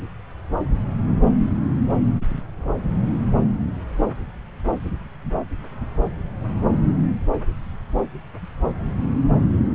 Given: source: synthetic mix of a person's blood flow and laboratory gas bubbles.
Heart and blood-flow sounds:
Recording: Doppler ultrasound of blood flow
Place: subclavian vein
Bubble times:
no bubbles
From the record:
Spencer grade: 0 (complete lack of bubble signals)

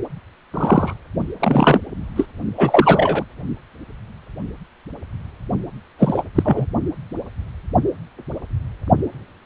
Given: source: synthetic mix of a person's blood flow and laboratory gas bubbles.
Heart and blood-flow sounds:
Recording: Doppler ultrasound of blood flow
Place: precordium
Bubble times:
0.53-0.94 s: bubbles
1.40-1.78 s: bubbles
2.16-2.25 s: bubbles
2.57-3.25 s: bubbles
5.98-6.22 s: bubbles
6.35-6.66 s: bubbles
From the record:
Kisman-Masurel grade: 223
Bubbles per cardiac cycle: several, 3 to 8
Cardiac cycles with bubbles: 10 to 50%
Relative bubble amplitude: loud (0.450 to 0.775)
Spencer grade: 2 (many but less than half of the cardiac periods contain bubble signals, singularly or in groups)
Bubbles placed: only in the low amplitude regions of the cardiac cycle

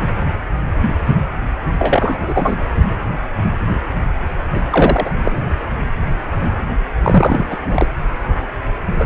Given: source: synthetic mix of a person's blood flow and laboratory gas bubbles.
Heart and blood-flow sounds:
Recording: Doppler ultrasound of blood flow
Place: precordium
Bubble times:
1.78-2.56 s: bubbles
4.55-4.60 s: bubbles
4.70-5.11 s: bubbles
5.23-5.50 s: bubbles
7.04-7.59 s: bubbles
7.68-7.87 s: bubbles
8.99-9.06 s: bubbles
From the record:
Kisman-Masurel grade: 223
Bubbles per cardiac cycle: several, 3 to 8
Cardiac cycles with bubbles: 10 to 50%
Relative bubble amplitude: loud (0.450 to 0.775)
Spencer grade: 2 (many but less than half of the cardiac periods contain bubble signals, singularly or in groups)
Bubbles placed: anywhere in the cardiac cycle

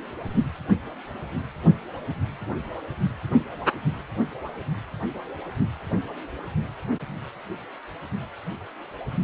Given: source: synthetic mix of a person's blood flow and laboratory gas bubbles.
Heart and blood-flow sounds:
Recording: Doppler ultrasound of blood flow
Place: precordium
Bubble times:
no bubbles
From the record:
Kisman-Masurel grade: 000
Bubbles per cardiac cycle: 0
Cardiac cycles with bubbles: 0%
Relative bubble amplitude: no bubbles discernible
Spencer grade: 0 (complete lack of bubble signals)

